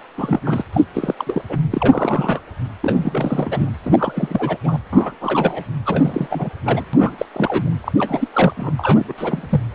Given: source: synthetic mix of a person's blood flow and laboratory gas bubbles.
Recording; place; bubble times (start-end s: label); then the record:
Doppler ultrasound of blood flow; precordium
0.18-0.40 s: bubbles
0.44-0.62 s: bubbles
0.72-0.84 s: bubbles
0.93-1.15 s: bubbles
1.18-1.42 s: bubbles
1.49-1.58 s: bubbles
1.71-2.40 s: bubbles
2.81-3.70 s: bubbles
3.84-4.56 s: bubbles
4.63-4.78 s: bubbles
4.92-5.12 s: bubbles
5.21-5.64 s: bubbles
5.85-6.50 s: bubbles
6.64-6.84 s: bubbles
6.93-7.25 s: bubbles
7.33-7.70 s: bubbles
7.80-7.92 s: bubbles
7.98-8.28 s: bubbles
8.33-8.54 s: bubbles
8.56-8.71 s: bubbles
8.78-9.04 s: bubbles
9.08-9.13 s: bubbles
9.18-9.61 s: bubbles
From the record:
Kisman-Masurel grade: 332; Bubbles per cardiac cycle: rolling drumbeat, 9 or more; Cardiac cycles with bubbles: 50 to 99%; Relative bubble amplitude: moderate (0.250 to 0.450); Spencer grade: 3 (all of the cardiac periods contain showers or single bubble signals, but not dominating or overriding the cardiac motion signals); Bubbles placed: anywhere in the cardiac cycle